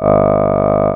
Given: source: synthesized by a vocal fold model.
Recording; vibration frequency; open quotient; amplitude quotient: sustained vowel; 50 Hz; 0.2; 1.3